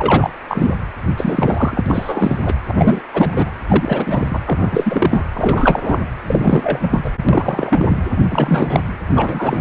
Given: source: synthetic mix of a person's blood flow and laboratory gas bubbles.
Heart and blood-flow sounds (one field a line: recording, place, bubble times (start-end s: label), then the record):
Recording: Doppler ultrasound of blood flow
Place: precordium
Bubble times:
0.00-0.30 s: bubbles
0.48-0.76 s: bubbles
1.17-2.43 s: bubbles
2.46-2.54 s: bubbles
2.68-2.74 s: bubbles
2.77-3.04 s: bubbles
3.13-3.50 s: bubbles
3.68-5.25 s: bubbles
5.34-5.80 s: bubbles
5.83-6.01 s: bubbles
6.27-7.00 s: bubbles
7.04-7.10 s: bubbles
7.29-7.98 s: bubbles
8.30-8.82 s: bubbles
9.14-9.61 s: bubbles
From the record:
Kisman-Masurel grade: 343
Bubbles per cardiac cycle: rolling drumbeat, 9 or more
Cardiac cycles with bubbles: 100%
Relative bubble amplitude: loud (0.450 to 0.775)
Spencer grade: 3 (all of the cardiac periods contain showers or single bubble signals, but not dominating or overriding the cardiac motion signals)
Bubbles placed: anywhere in the cardiac cycle